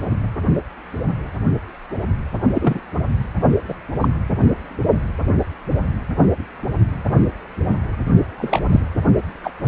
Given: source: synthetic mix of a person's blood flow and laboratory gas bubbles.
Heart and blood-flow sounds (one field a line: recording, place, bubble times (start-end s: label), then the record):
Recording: Doppler ultrasound of blood flow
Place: precordium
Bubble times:
2.54-2.80 s: bubbles
3.68-3.75 s: bubbles
4.00-4.08 s: bubbles
8.37-8.60 s: bubbles
8.71-8.80 s: bubbles
9.43-9.51 s: bubbles
9.64-9.68 s: bubbles
From the record:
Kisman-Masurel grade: 123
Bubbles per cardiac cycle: 1 to 2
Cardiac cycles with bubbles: 10 to 50%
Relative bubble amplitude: loud (0.450 to 0.775)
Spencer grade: 2 (many but less than half of the cardiac periods contain bubble signals, singularly or in groups)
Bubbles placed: only in the low amplitude regions of the cardiac cycle